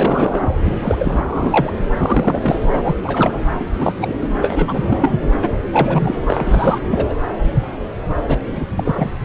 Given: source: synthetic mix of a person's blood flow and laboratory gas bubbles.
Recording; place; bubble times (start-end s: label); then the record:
Doppler ultrasound of blood flow; subclavian vein
0.00-0.50 s: bubbles
0.64-0.73 s: bubbles
0.82-1.73 s: bubbles
1.97-2.63 s: bubbles
2.71-2.94 s: bubbles
3.03-3.44 s: bubbles
3.59-3.64 s: bubbles
3.73-3.94 s: bubbles
3.99-4.14 s: bubbles
4.22-4.29 s: bubbles
4.42-5.19 s: bubbles
5.42-5.59 s: bubbles
5.72-6.15 s: bubbles
6.26-6.80 s: bubbles
6.91-7.14 s: bubbles
8.27-8.37 s: bubbles
8.53-8.64 s: bubbles
8.76-9.11 s: bubbles
From the record:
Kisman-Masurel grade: 332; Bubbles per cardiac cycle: rolling drumbeat, 9 or more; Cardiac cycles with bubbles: 50 to 99%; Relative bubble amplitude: moderate (0.250 to 0.450); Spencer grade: 3 (all of the cardiac periods contain showers or single bubble signals, but not dominating or overriding the cardiac motion signals); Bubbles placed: anywhere in the cardiac cycle